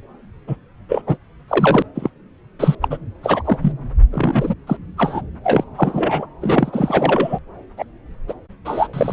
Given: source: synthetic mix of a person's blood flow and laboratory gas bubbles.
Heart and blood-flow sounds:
Doppler ultrasound of blood flow; subclavian vein
0.47-0.56 s: bubbles
0.89-1.02 s: bubbles
1.07-1.17 s: bubbles
1.48-1.82 s: bubbles
1.95-2.09 s: bubbles
2.59-2.75 s: bubbles
2.81-2.88 s: bubbles
2.90-2.97 s: bubbles
3.23-3.57 s: bubbles
3.61-3.72 s: bubbles
4.11-4.54 s: bubbles
4.67-4.77 s: bubbles
4.97-5.21 s: bubbles
5.43-5.64 s: bubbles
5.77-6.27 s: bubbles
6.42-7.39 s: bubbles
7.77-7.85 s: bubbles
8.28-8.33 s: bubbles
8.65-8.88 s: bubbles
8.93-9.13 s: bubbles
From the record:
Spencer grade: 3 (all of the cardiac periods contain showers or single bubble signals, but not dominating or overriding the cardiac motion signals); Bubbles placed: anywhere in the cardiac cycle

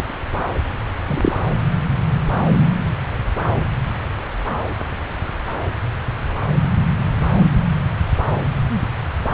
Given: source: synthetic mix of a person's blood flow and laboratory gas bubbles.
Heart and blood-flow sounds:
Doppler ultrasound of blood flow; subclavian vein
1.07-1.33 s: bubbles
From the record:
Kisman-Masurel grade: 113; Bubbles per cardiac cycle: 1 to 2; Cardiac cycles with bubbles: 1 to 10%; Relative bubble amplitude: loud (0.450 to 0.775); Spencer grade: 1 (occasional bubble signal discernible with the cardiac motion signal, with majority of cardiac periods free of bubbles); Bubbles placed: anywhere in the cardiac cycle

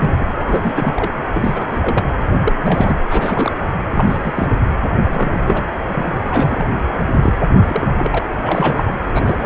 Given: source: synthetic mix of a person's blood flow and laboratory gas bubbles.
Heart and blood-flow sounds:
Doppler ultrasound of blood flow; precordium
0.00-0.17 s: bubbles
0.20-0.25 s: bubbles
0.38-0.93 s: bubbles
0.96-1.10 s: bubbles
1.33-1.66 s: bubbles
1.71-2.04 s: bubbles
2.39-2.53 s: bubbles
2.57-2.98 s: bubbles
3.08-3.52 s: bubbles
3.90-4.51 s: bubbles
5.04-5.62 s: bubbles
5.92-6.14 s: bubbles
6.26-6.67 s: bubbles
7.22-7.33 s: bubbles
7.62-7.88 s: bubbles
7.97-8.19 s: bubbles
8.43-8.84 s: bubbles
8.88-8.96 s: bubbles
9.14-9.46 s: bubbles
From the record:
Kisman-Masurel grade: 342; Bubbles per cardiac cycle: rolling drumbeat, 9 or more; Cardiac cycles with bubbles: 100%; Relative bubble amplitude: moderate (0.250 to 0.450); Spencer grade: 3 (all of the cardiac periods contain showers or single bubble signals, but not dominating or overriding the cardiac motion signals); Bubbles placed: anywhere in the cardiac cycle

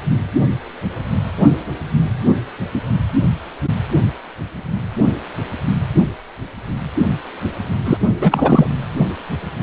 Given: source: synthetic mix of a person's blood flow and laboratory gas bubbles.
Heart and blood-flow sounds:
Doppler ultrasound of blood flow; precordium
7.85-7.97 s: bubbles
8.12-8.70 s: bubbles
From the record:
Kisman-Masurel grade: 213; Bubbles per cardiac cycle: several, 3 to 8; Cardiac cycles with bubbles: 1 to 10%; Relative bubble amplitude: loud (0.450 to 0.775); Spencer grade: 1 (occasional bubble signal discernible with the cardiac motion signal, with majority of cardiac periods free of bubbles); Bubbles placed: anywhere in the cardiac cycle

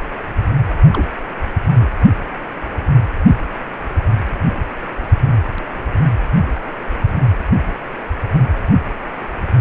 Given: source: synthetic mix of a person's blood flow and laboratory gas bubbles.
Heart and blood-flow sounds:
Doppler ultrasound of blood flow; precordium
0.90-1.07 s: bubbles
1.80-1.88 s: bubbles
From the record:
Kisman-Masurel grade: 111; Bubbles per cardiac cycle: 1 to 2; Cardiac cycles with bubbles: 1 to 10%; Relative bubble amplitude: barely perceptible (0.100 to 0.250); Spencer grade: 1 (occasional bubble signal discernible with the cardiac motion signal, with majority of cardiac periods free of bubbles); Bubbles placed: anywhere in the cardiac cycle

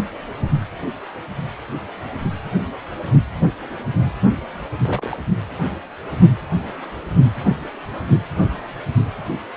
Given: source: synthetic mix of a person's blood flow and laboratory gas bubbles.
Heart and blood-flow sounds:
Doppler ultrasound of blood flow; precordium
4.82-5.08 s: bubbles
5.11-5.17 s: bubbles
From the record:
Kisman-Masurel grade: 111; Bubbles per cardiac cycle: 1 to 2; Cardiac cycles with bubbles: 1 to 10%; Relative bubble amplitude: barely perceptible (0.100 to 0.250); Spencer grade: 1 (occasional bubble signal discernible with the cardiac motion signal, with majority of cardiac periods free of bubbles); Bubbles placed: only in the low amplitude regions of the cardiac cycle

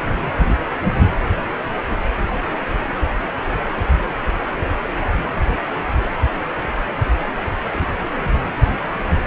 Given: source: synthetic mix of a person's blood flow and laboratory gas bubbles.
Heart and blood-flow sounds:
Doppler ultrasound of blood flow; precordium
no bubbles
From the record:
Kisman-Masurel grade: 000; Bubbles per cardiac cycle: 0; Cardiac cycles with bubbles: 0%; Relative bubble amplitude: no bubbles discernible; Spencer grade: 0 (complete lack of bubble signals)

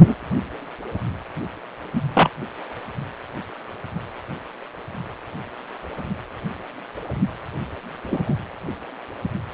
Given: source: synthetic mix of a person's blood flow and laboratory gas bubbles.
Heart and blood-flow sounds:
Doppler ultrasound of blood flow; precordium
0.00-0.15 s: bubbles
1.95-2.02 s: bubbles
2.15-2.29 s: bubbles
8.02-8.35 s: bubbles
From the record:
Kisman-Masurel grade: 123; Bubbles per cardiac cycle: 1 to 2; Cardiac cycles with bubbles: 10 to 50%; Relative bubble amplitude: loud (0.450 to 0.775); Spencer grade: 2 (many but less than half of the cardiac periods contain bubble signals, singularly or in groups); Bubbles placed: anywhere in the cardiac cycle

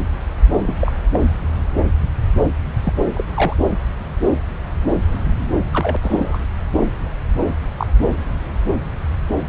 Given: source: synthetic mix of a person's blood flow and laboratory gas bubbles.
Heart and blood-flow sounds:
Doppler ultrasound of blood flow; subclavian vein
0.63-0.75 s: bubbles
0.79-0.92 s: bubbles
1.13-1.20 s: bubbles
2.43-2.49 s: bubbles
2.84-2.93 s: bubbles
3.15-3.23 s: bubbles
3.35-3.54 s: bubbles
5.71-5.96 s: bubbles
6.02-6.38 s: bubbles
7.40-7.47 s: bubbles
7.78-7.86 s: bubbles
From the record:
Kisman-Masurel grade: 122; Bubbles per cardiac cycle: 1 to 2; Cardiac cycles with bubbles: 10 to 50%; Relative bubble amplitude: moderate (0.250 to 0.450); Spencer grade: 2 (many but less than half of the cardiac periods contain bubble signals, singularly or in groups); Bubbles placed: anywhere in the cardiac cycle

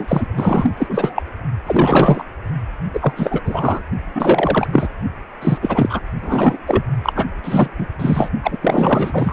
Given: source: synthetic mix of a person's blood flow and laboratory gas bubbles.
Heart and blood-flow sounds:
Doppler ultrasound of blood flow; precordium
0.00-0.27 s: bubbles
0.36-0.75 s: bubbles
0.77-1.23 s: bubbles
1.66-2.24 s: bubbles
2.94-3.40 s: bubbles
3.45-3.81 s: bubbles
4.15-4.68 s: bubbles
4.71-4.88 s: bubbles
5.42-5.58 s: bubbles
5.62-6.00 s: bubbles
6.22-6.59 s: bubbles
6.67-6.83 s: bubbles
7.03-7.29 s: bubbles
7.44-7.68 s: bubbles
7.79-7.87 s: bubbles
7.99-8.29 s: bubbles
8.43-8.59 s: bubbles
8.61-9.33 s: bubbles
From the record:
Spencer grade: 4 (maximum detectable bubble signal sounding continuously throughout systole and diastole of every cardiac period, and overriding the amplitude of the normal cardiac signals); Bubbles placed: only in the low amplitude regions of the cardiac cycle

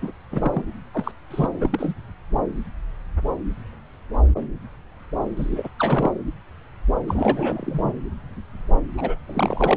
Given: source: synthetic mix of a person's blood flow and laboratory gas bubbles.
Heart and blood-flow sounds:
Doppler ultrasound of blood flow; subclavian vein
0.00-0.12 s: bubbles
0.32-0.62 s: bubbles
0.94-1.11 s: bubbles
1.30-1.49 s: bubbles
1.58-1.94 s: bubbles
5.37-5.69 s: bubbles
5.79-6.12 s: bubbles
7.08-7.93 s: bubbles
8.97-9.17 s: bubbles
9.27-9.77 s: bubbles
From the record:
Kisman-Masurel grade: 332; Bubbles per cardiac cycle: rolling drumbeat, 9 or more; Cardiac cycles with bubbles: 50 to 99%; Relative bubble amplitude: moderate (0.250 to 0.450); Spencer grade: 3 (all of the cardiac periods contain showers or single bubble signals, but not dominating or overriding the cardiac motion signals); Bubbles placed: anywhere in the cardiac cycle

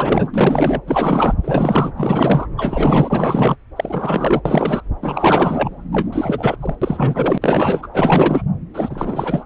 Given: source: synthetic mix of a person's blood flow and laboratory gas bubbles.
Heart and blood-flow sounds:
Doppler ultrasound of blood flow; subclavian vein
0.00-0.29 s: bubbles
0.34-0.81 s: bubbles
0.85-1.34 s: bubbles
1.42-1.92 s: bubbles
1.97-2.47 s: bubbles
2.57-3.56 s: bubbles
3.76-4.41 s: bubbles
4.45-4.80 s: bubbles
5.01-5.70 s: bubbles
5.92-6.56 s: bubbles
6.60-6.75 s: bubbles
6.81-7.38 s: bubbles
7.41-7.88 s: bubbles
7.94-8.42 s: bubbles
8.73-9.44 s: bubbles
From the record:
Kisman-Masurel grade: 444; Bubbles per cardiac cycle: continuous sound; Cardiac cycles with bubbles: 100%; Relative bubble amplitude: maximal (0.775 to 0.999); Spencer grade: 4 (maximum detectable bubble signal sounding continuously throughout systole and diastole of every cardiac period, and overriding the amplitude of the normal cardiac signals); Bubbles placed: anywhere in the cardiac cycle

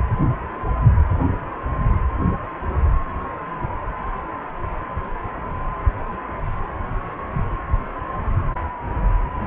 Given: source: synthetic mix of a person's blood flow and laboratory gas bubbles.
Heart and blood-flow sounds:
Doppler ultrasound of blood flow; precordium
7.33-7.45 s: bubbles
From the record:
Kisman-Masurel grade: 111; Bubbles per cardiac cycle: 1 to 2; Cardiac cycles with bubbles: 1 to 10%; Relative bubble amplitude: barely perceptible (0.100 to 0.250); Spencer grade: 1 (occasional bubble signal discernible with the cardiac motion signal, with majority of cardiac periods free of bubbles); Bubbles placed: anywhere in the cardiac cycle

